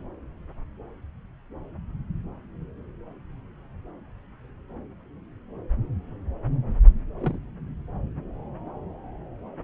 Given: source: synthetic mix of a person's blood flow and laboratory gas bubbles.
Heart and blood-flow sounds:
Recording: Doppler ultrasound of blood flow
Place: subclavian vein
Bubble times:
7.20-7.39 s: bubbles
From the record:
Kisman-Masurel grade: 111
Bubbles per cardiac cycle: 1 to 2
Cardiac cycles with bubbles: 1 to 10%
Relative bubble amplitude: barely perceptible (0.100 to 0.250)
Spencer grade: 1 (occasional bubble signal discernible with the cardiac motion signal, with majority of cardiac periods free of bubbles)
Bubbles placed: anywhere in the cardiac cycle

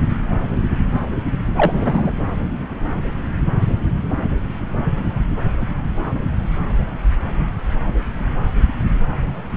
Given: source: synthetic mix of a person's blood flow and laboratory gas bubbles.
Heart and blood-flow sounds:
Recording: Doppler ultrasound of blood flow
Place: subclavian vein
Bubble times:
1.56-2.11 s: bubbles
From the record:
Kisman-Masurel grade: 113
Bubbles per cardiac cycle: 1 to 2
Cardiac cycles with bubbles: 1 to 10%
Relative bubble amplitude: loud (0.450 to 0.775)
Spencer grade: 1 (occasional bubble signal discernible with the cardiac motion signal, with majority of cardiac periods free of bubbles)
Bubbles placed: anywhere in the cardiac cycle

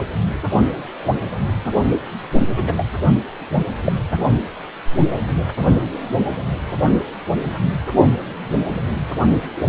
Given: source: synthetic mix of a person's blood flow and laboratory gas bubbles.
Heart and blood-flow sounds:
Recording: Doppler ultrasound of blood flow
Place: precordium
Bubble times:
2.56-2.87 s: bubbles
3.85-3.92 s: bubbles
From the record:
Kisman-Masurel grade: 123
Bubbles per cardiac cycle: 1 to 2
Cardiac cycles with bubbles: 10 to 50%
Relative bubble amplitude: loud (0.450 to 0.775)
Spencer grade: 2 (many but less than half of the cardiac periods contain bubble signals, singularly or in groups)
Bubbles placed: only in the low amplitude regions of the cardiac cycle

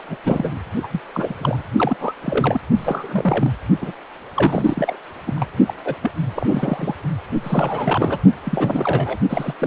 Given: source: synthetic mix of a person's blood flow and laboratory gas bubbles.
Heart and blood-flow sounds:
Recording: Doppler ultrasound of blood flow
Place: precordium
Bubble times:
0.08-0.17 s: bubbles
0.24-0.52 s: bubbles
0.83-0.87 s: bubbles
0.91-1.00 s: bubbles
1.14-1.64 s: bubbles
1.76-1.96 s: bubbles
2.00-2.12 s: bubbles
2.23-2.60 s: bubbles
2.77-3.52 s: bubbles
3.81-3.92 s: bubbles
4.36-4.99 s: bubbles
5.25-5.33 s: bubbles
5.35-5.46 s: bubbles
5.67-5.74 s: bubbles
5.84-5.96 s: bubbles
6.01-6.11 s: bubbles
6.35-6.95 s: bubbles
7.43-8.19 s: bubbles
8.44-9.17 s: bubbles
9.29-9.54 s: bubbles
9.58-9.67 s: bubbles
From the record:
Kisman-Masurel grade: 342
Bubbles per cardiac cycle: rolling drumbeat, 9 or more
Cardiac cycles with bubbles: 100%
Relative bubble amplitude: moderate (0.250 to 0.450)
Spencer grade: 3 (all of the cardiac periods contain showers or single bubble signals, but not dominating or overriding the cardiac motion signals)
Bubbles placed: only in the low amplitude regions of the cardiac cycle

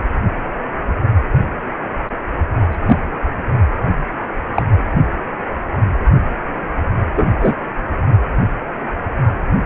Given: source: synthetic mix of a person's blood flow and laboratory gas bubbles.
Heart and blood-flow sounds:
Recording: Doppler ultrasound of blood flow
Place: precordium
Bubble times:
2.71-3.02 s: bubbles
4.54-4.62 s: bubbles
7.16-7.33 s: bubbles
7.40-7.56 s: bubbles
From the record:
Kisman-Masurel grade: 123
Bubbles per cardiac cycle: 1 to 2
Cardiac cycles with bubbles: 10 to 50%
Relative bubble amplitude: loud (0.450 to 0.775)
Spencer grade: 2 (many but less than half of the cardiac periods contain bubble signals, singularly or in groups)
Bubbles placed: only in the low amplitude regions of the cardiac cycle

